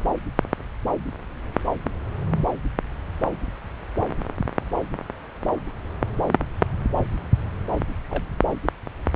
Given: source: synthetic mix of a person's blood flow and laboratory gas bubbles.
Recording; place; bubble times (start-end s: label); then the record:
Doppler ultrasound of blood flow; subclavian vein
8.09-8.24 s: bubbles
From the record:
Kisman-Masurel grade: 111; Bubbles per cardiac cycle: 1 to 2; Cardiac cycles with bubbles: 1 to 10%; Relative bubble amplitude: barely perceptible (0.100 to 0.250); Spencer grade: 1 (occasional bubble signal discernible with the cardiac motion signal, with majority of cardiac periods free of bubbles); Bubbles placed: anywhere in the cardiac cycle